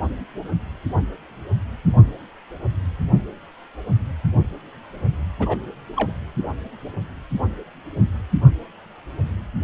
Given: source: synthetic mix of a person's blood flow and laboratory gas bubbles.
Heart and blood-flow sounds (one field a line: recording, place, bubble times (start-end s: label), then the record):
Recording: Doppler ultrasound of blood flow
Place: precordium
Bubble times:
5.39-5.56 s: bubbles
5.96-6.12 s: bubbles
From the record:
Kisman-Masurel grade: 112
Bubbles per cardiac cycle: 1 to 2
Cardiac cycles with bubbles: 1 to 10%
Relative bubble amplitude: moderate (0.250 to 0.450)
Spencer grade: 1 (occasional bubble signal discernible with the cardiac motion signal, with majority of cardiac periods free of bubbles)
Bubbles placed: anywhere in the cardiac cycle